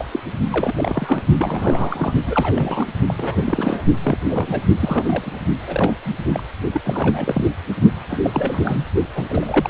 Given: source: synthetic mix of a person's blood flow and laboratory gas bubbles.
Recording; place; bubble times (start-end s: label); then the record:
Doppler ultrasound of blood flow; precordium
0.00-0.07 s: bubbles
0.11-0.20 s: bubbles
0.51-1.23 s: bubbles
1.38-2.14 s: bubbles
2.27-2.87 s: bubbles
3.08-3.83 s: bubbles
4.04-4.17 s: bubbles
4.28-4.66 s: bubbles
4.79-5.04 s: bubbles
5.07-5.31 s: bubbles
5.67-5.94 s: bubbles
6.06-6.13 s: bubbles
6.24-6.43 s: bubbles
6.73-6.81 s: bubbles
6.83-7.45 s: bubbles
8.08-8.18 s: bubbles
8.22-8.85 s: bubbles
9.15-9.25 s: bubbles
9.29-9.69 s: bubbles
From the record:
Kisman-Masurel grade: 342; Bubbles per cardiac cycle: rolling drumbeat, 9 or more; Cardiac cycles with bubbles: 100%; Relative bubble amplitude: moderate (0.250 to 0.450); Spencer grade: 3 (all of the cardiac periods contain showers or single bubble signals, but not dominating or overriding the cardiac motion signals); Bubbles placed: only in the low amplitude regions of the cardiac cycle